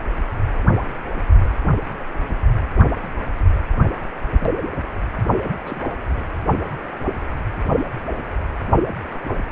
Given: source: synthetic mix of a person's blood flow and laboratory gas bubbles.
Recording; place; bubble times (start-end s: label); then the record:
Doppler ultrasound of blood flow; precordium
3.93-3.97 s: bubbles
4.28-4.81 s: bubbles
5.44-5.49 s: bubbles
5.65-5.82 s: bubbles
6.00-6.29 s: bubbles
From the record:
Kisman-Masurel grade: 221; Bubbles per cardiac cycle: several, 3 to 8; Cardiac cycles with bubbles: 10 to 50%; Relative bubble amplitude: barely perceptible (0.100 to 0.250); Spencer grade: 2 (many but less than half of the cardiac periods contain bubble signals, singularly or in groups); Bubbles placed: only in the low amplitude regions of the cardiac cycle